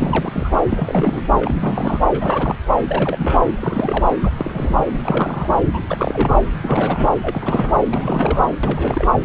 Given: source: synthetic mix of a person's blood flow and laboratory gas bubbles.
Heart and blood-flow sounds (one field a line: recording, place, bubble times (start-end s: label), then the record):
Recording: Doppler ultrasound of blood flow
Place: subclavian vein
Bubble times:
0.00-0.50 s: bubbles
0.69-1.24 s: bubbles
1.35-2.00 s: bubbles
2.10-2.62 s: bubbles
2.89-3.42 s: bubbles
3.58-4.16 s: bubbles
4.23-4.30 s: bubbles
4.37-4.86 s: bubbles
4.92-5.50 s: bubbles
5.74-5.83 s: bubbles
5.90-6.43 s: bubbles
6.64-7.10 s: bubbles
7.21-7.73 s: bubbles
7.88-8.45 s: bubbles
8.63-9.13 s: bubbles
From the record:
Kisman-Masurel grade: 342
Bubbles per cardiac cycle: rolling drumbeat, 9 or more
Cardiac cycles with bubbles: 100%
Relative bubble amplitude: moderate (0.250 to 0.450)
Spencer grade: 3 (all of the cardiac periods contain showers or single bubble signals, but not dominating or overriding the cardiac motion signals)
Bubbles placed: anywhere in the cardiac cycle